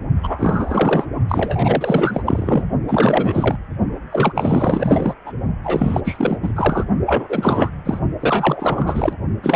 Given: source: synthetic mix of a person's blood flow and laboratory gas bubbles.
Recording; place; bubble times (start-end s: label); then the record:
Doppler ultrasound of blood flow; precordium
0.23-1.06 s: bubbles
1.28-2.64 s: bubbles
2.88-3.57 s: bubbles
4.12-5.14 s: bubbles
5.26-5.33 s: bubbles
5.63-6.01 s: bubbles
6.04-6.38 s: bubbles
6.42-6.52 s: bubbles
6.55-6.85 s: bubbles
7.05-7.71 s: bubbles
7.85-8.00 s: bubbles
8.20-9.13 s: bubbles
9.43-9.56 s: bubbles
From the record:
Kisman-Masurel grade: 444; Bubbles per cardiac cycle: continuous sound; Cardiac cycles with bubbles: 100%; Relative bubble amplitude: maximal (0.775 to 0.999); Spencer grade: 4 (maximum detectable bubble signal sounding continuously throughout systole and diastole of every cardiac period, and overriding the amplitude of the normal cardiac signals); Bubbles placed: only in the low amplitude regions of the cardiac cycle